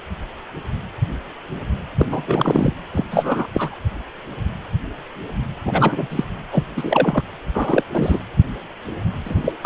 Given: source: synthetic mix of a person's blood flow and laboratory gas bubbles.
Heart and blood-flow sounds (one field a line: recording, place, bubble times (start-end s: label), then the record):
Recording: Doppler ultrasound of blood flow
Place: precordium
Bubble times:
1.98-2.21 s: bubbles
2.27-2.73 s: bubbles
2.93-3.04 s: bubbles
3.11-3.47 s: bubbles
3.54-3.75 s: bubbles
5.65-6.07 s: bubbles
6.10-6.24 s: bubbles
6.50-6.63 s: bubbles
6.76-7.21 s: bubbles
7.53-7.83 s: bubbles
7.92-8.19 s: bubbles
9.25-9.53 s: bubbles
9.62-9.65 s: bubbles
From the record:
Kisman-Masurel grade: 233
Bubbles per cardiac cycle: several, 3 to 8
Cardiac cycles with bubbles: 50 to 99%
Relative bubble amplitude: loud (0.450 to 0.775)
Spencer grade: 3 (all of the cardiac periods contain showers or single bubble signals, but not dominating or overriding the cardiac motion signals)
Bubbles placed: anywhere in the cardiac cycle